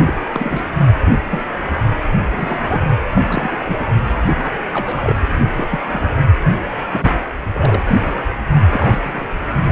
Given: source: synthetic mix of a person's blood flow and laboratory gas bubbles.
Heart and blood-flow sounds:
Doppler ultrasound of blood flow; precordium
0.00-0.04 s: bubbles
0.06-0.13 s: bubbles
0.32-0.65 s: bubbles
1.06-1.12 s: bubbles
1.30-1.41 s: bubbles
2.36-2.84 s: bubbles
3.14-3.21 s: bubbles
3.27-3.84 s: bubbles
4.37-4.63 s: bubbles
4.73-5.14 s: bubbles
5.54-5.67 s: bubbles
5.70-5.80 s: bubbles
5.92-5.99 s: bubbles
6.92-7.12 s: bubbles
7.52-7.81 s: bubbles
7.87-8.15 s: bubbles
8.70-8.99 s: bubbles
9.03-9.52 s: bubbles
From the record:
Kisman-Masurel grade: 242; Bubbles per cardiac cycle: several, 3 to 8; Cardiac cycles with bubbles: 100%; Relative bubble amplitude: moderate (0.250 to 0.450); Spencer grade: 3 (all of the cardiac periods contain showers or single bubble signals, but not dominating or overriding the cardiac motion signals); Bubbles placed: anywhere in the cardiac cycle

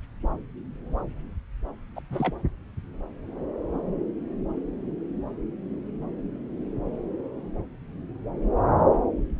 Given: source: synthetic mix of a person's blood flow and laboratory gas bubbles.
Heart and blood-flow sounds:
Doppler ultrasound of blood flow; subclavian vein
1.96-2.00 s: bubbles
2.10-2.34 s: bubbles
From the record:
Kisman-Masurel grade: 211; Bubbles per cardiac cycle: several, 3 to 8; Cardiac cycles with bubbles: 1 to 10%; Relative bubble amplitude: barely perceptible (0.100 to 0.250); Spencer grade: 1 (occasional bubble signal discernible with the cardiac motion signal, with majority of cardiac periods free of bubbles); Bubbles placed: anywhere in the cardiac cycle

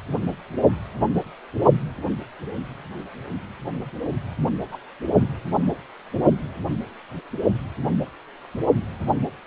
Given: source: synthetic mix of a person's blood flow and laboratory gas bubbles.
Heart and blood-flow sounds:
Doppler ultrasound of blood flow; precordium
4.71-4.78 s: bubbles
From the record:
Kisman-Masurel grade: 111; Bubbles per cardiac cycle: 1 to 2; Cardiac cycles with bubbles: 1 to 10%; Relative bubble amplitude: barely perceptible (0.100 to 0.250); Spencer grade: 1 (occasional bubble signal discernible with the cardiac motion signal, with majority of cardiac periods free of bubbles); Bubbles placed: only in the low amplitude regions of the cardiac cycle

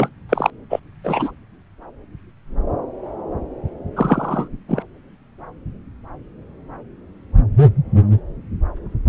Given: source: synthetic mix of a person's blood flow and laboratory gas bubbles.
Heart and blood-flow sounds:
Doppler ultrasound of blood flow; subclavian vein
0.00-0.09 s: bubbles
0.29-0.50 s: bubbles
0.70-0.80 s: bubbles
1.04-1.31 s: bubbles
3.96-4.48 s: bubbles
4.68-4.83 s: bubbles
From the record:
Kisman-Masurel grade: 223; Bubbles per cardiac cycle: several, 3 to 8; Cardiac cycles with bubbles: 10 to 50%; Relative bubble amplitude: loud (0.450 to 0.775); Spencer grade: 2 (many but less than half of the cardiac periods contain bubble signals, singularly or in groups); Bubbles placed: anywhere in the cardiac cycle

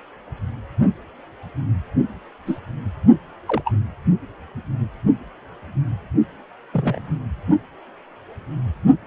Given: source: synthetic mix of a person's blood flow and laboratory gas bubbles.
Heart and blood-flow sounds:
Doppler ultrasound of blood flow; precordium
2.47-2.58 s: bubbles
3.47-3.62 s: bubbles
3.65-3.72 s: bubbles
6.72-7.17 s: bubbles
From the record:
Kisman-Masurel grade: 122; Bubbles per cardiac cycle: 1 to 2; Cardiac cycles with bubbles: 10 to 50%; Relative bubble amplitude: moderate (0.250 to 0.450); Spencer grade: 2 (many but less than half of the cardiac periods contain bubble signals, singularly or in groups); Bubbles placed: only in the low amplitude regions of the cardiac cycle

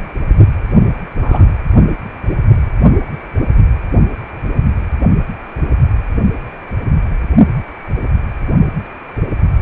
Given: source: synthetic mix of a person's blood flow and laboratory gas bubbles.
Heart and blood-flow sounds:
Doppler ultrasound of blood flow; precordium
1.21-1.45 s: bubbles
From the record:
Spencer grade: 1 (occasional bubble signal discernible with the cardiac motion signal, with majority of cardiac periods free of bubbles); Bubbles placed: only in the low amplitude regions of the cardiac cycle

